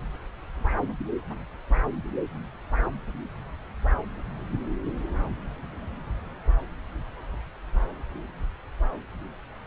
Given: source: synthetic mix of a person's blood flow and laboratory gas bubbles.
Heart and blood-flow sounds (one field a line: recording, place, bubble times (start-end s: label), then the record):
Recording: Doppler ultrasound of blood flow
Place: subclavian vein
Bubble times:
no bubbles
From the record:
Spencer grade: 0 (complete lack of bubble signals)